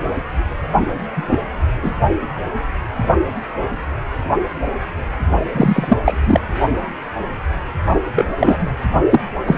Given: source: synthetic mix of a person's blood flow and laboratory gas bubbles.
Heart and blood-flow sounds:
Doppler ultrasound of blood flow; precordium
1.15-1.42 s: bubbles
1.82-1.91 s: bubbles
5.53-5.98 s: bubbles
6.05-6.40 s: bubbles
8.16-8.28 s: bubbles
8.40-8.71 s: bubbles
9.11-9.20 s: bubbles
9.46-9.58 s: bubbles
From the record:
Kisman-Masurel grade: 223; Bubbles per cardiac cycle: several, 3 to 8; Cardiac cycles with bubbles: 10 to 50%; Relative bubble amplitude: loud (0.450 to 0.775); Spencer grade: 2 (many but less than half of the cardiac periods contain bubble signals, singularly or in groups); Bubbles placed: only in the low amplitude regions of the cardiac cycle

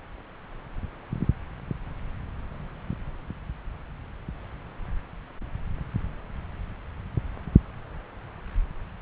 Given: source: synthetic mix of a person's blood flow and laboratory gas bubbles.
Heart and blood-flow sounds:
Doppler ultrasound of blood flow; subclavian vein
no bubbles
From the record:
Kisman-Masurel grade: 000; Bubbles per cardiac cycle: 0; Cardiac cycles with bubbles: 0%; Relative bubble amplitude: no bubbles discernible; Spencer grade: 0 (complete lack of bubble signals)

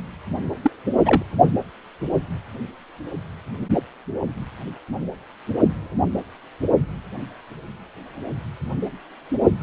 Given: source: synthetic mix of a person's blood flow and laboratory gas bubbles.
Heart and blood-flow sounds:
Doppler ultrasound of blood flow; precordium
0.62-0.71 s: bubbles
1.05-1.23 s: bubbles
From the record:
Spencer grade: 1 (occasional bubble signal discernible with the cardiac motion signal, with majority of cardiac periods free of bubbles); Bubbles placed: only in the low amplitude regions of the cardiac cycle

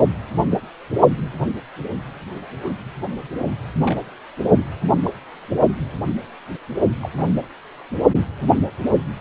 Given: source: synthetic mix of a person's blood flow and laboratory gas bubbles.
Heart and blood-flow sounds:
Doppler ultrasound of blood flow; precordium
1.39-1.46 s: bubbles
2.64-2.75 s: bubbles
3.84-3.96 s: bubbles
5.03-5.11 s: bubbles
7.00-7.09 s: bubbles
7.17-7.30 s: bubbles
From the record:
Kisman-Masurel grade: 121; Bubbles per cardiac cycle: 1 to 2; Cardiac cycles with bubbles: 10 to 50%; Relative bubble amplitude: barely perceptible (0.100 to 0.250); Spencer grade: 2 (many but less than half of the cardiac periods contain bubble signals, singularly or in groups); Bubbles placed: only in the low amplitude regions of the cardiac cycle

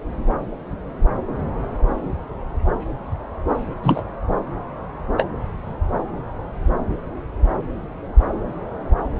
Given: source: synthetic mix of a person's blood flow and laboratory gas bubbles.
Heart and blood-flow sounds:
Doppler ultrasound of blood flow; subclavian vein
3.83-4.03 s: bubbles
5.18-5.25 s: bubbles
From the record:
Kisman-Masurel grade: 113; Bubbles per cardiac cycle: 1 to 2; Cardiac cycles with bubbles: 1 to 10%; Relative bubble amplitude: loud (0.450 to 0.775); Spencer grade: 1 (occasional bubble signal discernible with the cardiac motion signal, with majority of cardiac periods free of bubbles); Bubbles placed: anywhere in the cardiac cycle

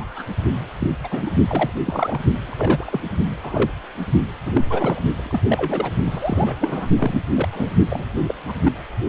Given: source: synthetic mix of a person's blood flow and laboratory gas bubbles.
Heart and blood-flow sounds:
Doppler ultrasound of blood flow; precordium
0.00-0.25 s: bubbles
0.79-0.97 s: bubbles
1.04-1.08 s: bubbles
1.10-1.31 s: bubbles
1.47-1.71 s: bubbles
1.85-2.21 s: bubbles
2.46-2.54 s: bubbles
2.57-3.00 s: bubbles
3.43-3.71 s: bubbles
4.46-5.00 s: bubbles
5.13-5.42 s: bubbles
5.48-5.93 s: bubbles
6.04-6.55 s: bubbles
6.61-6.88 s: bubbles
6.98-7.22 s: bubbles
7.32-7.49 s: bubbles
7.52-7.71 s: bubbles
7.89-8.05 s: bubbles
8.27-8.34 s: bubbles
8.48-8.52 s: bubbles
8.62-8.72 s: bubbles
From the record:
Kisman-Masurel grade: 242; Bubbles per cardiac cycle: several, 3 to 8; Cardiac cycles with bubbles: 100%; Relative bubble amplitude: moderate (0.250 to 0.450); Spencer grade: 3 (all of the cardiac periods contain showers or single bubble signals, but not dominating or overriding the cardiac motion signals); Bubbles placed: only in the low amplitude regions of the cardiac cycle

